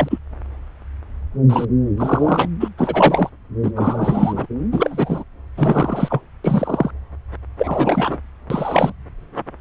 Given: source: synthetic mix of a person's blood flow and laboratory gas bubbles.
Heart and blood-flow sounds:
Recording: Doppler ultrasound of blood flow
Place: subclavian vein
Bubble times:
0.00-0.18 s: bubbles
1.49-1.65 s: bubbles
1.97-2.48 s: bubbles
2.60-2.69 s: bubbles
2.77-3.29 s: bubbles
3.62-3.71 s: bubbles
3.75-4.46 s: bubbles
4.71-5.24 s: bubbles
5.57-6.21 s: bubbles
6.44-6.91 s: bubbles
7.58-8.20 s: bubbles
8.50-8.92 s: bubbles
From the record:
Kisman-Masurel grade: 233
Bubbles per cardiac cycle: several, 3 to 8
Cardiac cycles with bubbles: 50 to 99%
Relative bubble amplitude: loud (0.450 to 0.775)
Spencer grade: 3 (all of the cardiac periods contain showers or single bubble signals, but not dominating or overriding the cardiac motion signals)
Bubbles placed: anywhere in the cardiac cycle

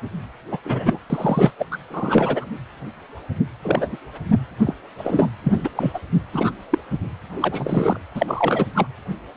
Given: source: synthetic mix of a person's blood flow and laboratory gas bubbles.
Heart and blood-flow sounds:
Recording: Doppler ultrasound of blood flow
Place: precordium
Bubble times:
0.51-0.58 s: bubbles
0.65-0.99 s: bubbles
1.09-1.51 s: bubbles
1.58-1.66 s: bubbles
1.71-1.77 s: bubbles
1.90-2.46 s: bubbles
3.62-3.97 s: bubbles
4.66-4.75 s: bubbles
4.98-5.29 s: bubbles
5.44-5.70 s: bubbles
5.77-6.00 s: bubbles
6.33-6.51 s: bubbles
6.70-6.79 s: bubbles
7.40-7.99 s: bubbles
8.14-8.67 s: bubbles
8.74-8.87 s: bubbles
From the record:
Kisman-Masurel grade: 233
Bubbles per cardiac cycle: several, 3 to 8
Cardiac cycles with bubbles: 50 to 99%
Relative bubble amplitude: loud (0.450 to 0.775)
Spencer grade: 3 (all of the cardiac periods contain showers or single bubble signals, but not dominating or overriding the cardiac motion signals)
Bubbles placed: anywhere in the cardiac cycle

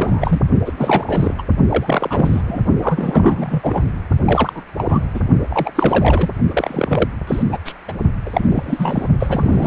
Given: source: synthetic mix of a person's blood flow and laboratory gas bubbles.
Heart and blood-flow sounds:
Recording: Doppler ultrasound of blood flow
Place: precordium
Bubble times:
0.00-0.41 s: bubbles
0.65-0.72 s: bubbles
0.77-1.34 s: bubbles
1.38-1.42 s: bubbles
1.68-2.42 s: bubbles
2.46-2.62 s: bubbles
2.81-3.83 s: bubbles
4.25-4.62 s: bubbles
4.77-5.03 s: bubbles
5.14-5.21 s: bubbles
5.50-5.71 s: bubbles
5.75-6.29 s: bubbles
6.51-7.08 s: bubbles
7.27-7.43 s: bubbles
7.49-7.58 s: bubbles
7.65-7.74 s: bubbles
7.88-7.92 s: bubbles
8.25-9.08 s: bubbles
9.19-9.67 s: bubbles
From the record:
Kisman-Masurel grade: 343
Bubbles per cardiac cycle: rolling drumbeat, 9 or more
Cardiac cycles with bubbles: 100%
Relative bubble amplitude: loud (0.450 to 0.775)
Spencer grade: 3 (all of the cardiac periods contain showers or single bubble signals, but not dominating or overriding the cardiac motion signals)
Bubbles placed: only in the low amplitude regions of the cardiac cycle

